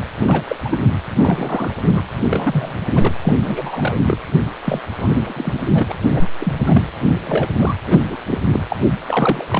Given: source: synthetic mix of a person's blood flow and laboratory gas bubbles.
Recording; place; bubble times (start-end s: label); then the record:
Doppler ultrasound of blood flow; precordium
0.19-0.45 s: bubbles
0.49-0.56 s: bubbles
0.65-0.77 s: bubbles
0.80-0.88 s: bubbles
1.17-1.74 s: bubbles
1.82-2.02 s: bubbles
2.29-2.80 s: bubbles
2.96-3.13 s: bubbles
3.23-3.33 s: bubbles
3.41-3.99 s: bubbles
4.06-4.18 s: bubbles
4.64-4.81 s: bubbles
4.99-5.92 s: bubbles
6.12-6.28 s: bubbles
6.40-6.53 s: bubbles
6.66-6.82 s: bubbles
7.24-7.48 s: bubbles
7.58-7.75 s: bubbles
7.87-8.16 s: bubbles
8.27-8.41 s: bubbles
8.54-8.60 s: bubbles
8.68-8.76 s: bubbles
9.04-9.45 s: bubbles
9.48-9.60 s: bubbles
From the record:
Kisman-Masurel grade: 242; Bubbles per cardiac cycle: several, 3 to 8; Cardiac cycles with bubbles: 100%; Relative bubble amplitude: moderate (0.250 to 0.450); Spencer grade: 3 (all of the cardiac periods contain showers or single bubble signals, but not dominating or overriding the cardiac motion signals); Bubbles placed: anywhere in the cardiac cycle